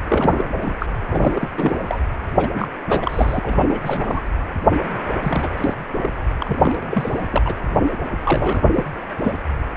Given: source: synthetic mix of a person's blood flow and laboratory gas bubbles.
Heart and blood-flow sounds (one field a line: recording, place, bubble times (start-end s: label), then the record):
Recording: Doppler ultrasound of blood flow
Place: precordium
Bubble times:
0.06-0.48 s: bubbles
0.62-0.76 s: bubbles
0.79-0.86 s: bubbles
1.08-1.49 s: bubbles
1.57-1.75 s: bubbles
1.85-1.98 s: bubbles
2.35-2.48 s: bubbles
2.54-2.67 s: bubbles
2.86-3.39 s: bubbles
3.42-4.21 s: bubbles
5.22-5.48 s: bubbles
5.56-5.74 s: bubbles
6.02-6.10 s: bubbles
6.40-6.76 s: bubbles
6.83-7.28 s: bubbles
7.30-7.42 s: bubbles
7.45-7.55 s: bubbles
8.24-8.64 s: bubbles
8.74-8.84 s: bubbles
9.23-9.31 s: bubbles
From the record:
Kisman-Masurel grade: 342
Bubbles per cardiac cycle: rolling drumbeat, 9 or more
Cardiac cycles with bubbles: 100%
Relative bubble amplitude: moderate (0.250 to 0.450)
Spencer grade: 3 (all of the cardiac periods contain showers or single bubble signals, but not dominating or overriding the cardiac motion signals)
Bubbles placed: anywhere in the cardiac cycle